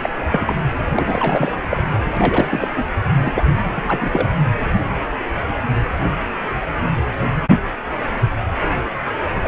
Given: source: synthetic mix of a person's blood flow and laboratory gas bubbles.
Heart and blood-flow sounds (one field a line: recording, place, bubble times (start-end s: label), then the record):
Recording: Doppler ultrasound of blood flow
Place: precordium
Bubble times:
0.02-0.10 s: bubbles
0.21-0.28 s: bubbles
0.32-0.54 s: bubbles
0.92-1.52 s: bubbles
1.70-2.01 s: bubbles
2.17-2.68 s: bubbles
2.75-2.85 s: bubbles
3.25-3.42 s: bubbles
3.64-4.29 s: bubbles
9.43-9.48 s: bubbles
From the record:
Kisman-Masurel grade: 332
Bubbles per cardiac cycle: rolling drumbeat, 9 or more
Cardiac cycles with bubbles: 50 to 99%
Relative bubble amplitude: moderate (0.250 to 0.450)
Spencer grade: 3 (all of the cardiac periods contain showers or single bubble signals, but not dominating or overriding the cardiac motion signals)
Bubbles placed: anywhere in the cardiac cycle